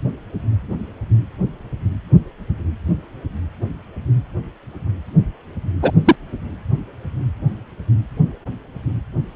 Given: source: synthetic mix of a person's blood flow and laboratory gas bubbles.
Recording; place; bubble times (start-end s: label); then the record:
Doppler ultrasound of blood flow; precordium
5.82-5.92 s: bubbles
6.04-6.16 s: bubbles
From the record:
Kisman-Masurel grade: 113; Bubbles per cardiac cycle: 1 to 2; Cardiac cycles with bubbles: 1 to 10%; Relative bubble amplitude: loud (0.450 to 0.775); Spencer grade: 1 (occasional bubble signal discernible with the cardiac motion signal, with majority of cardiac periods free of bubbles); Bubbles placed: anywhere in the cardiac cycle